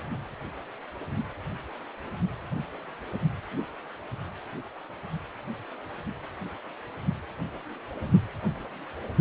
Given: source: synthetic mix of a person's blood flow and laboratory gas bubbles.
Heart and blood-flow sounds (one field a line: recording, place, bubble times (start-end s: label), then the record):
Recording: Doppler ultrasound of blood flow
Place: precordium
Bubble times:
no bubbles
From the record:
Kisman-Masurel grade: 000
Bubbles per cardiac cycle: 0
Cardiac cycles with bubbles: 0%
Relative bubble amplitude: no bubbles discernible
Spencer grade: 0 (complete lack of bubble signals)